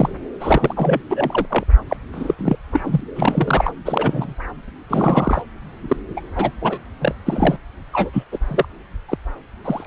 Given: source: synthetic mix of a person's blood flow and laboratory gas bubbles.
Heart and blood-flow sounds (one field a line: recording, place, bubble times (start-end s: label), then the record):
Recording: Doppler ultrasound of blood flow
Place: subclavian vein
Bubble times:
0.00-0.09 s: bubbles
0.40-1.01 s: bubbles
1.10-1.45 s: bubbles
1.50-1.64 s: bubbles
1.89-1.97 s: bubbles
2.12-2.35 s: bubbles
2.39-2.56 s: bubbles
2.72-3.01 s: bubbles
3.16-3.74 s: bubbles
3.85-4.34 s: bubbles
4.89-5.42 s: bubbles
5.88-5.96 s: bubbles
6.17-6.21 s: bubbles
6.35-6.51 s: bubbles
6.61-6.79 s: bubbles
7.00-7.15 s: bubbles
7.26-7.57 s: bubbles
7.93-8.11 s: bubbles
8.13-8.23 s: bubbles
8.32-8.38 s: bubbles
8.48-8.65 s: bubbles
9.09-9.18 s: bubbles
9.64-9.87 s: bubbles
From the record:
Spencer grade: 3 (all of the cardiac periods contain showers or single bubble signals, but not dominating or overriding the cardiac motion signals)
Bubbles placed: anywhere in the cardiac cycle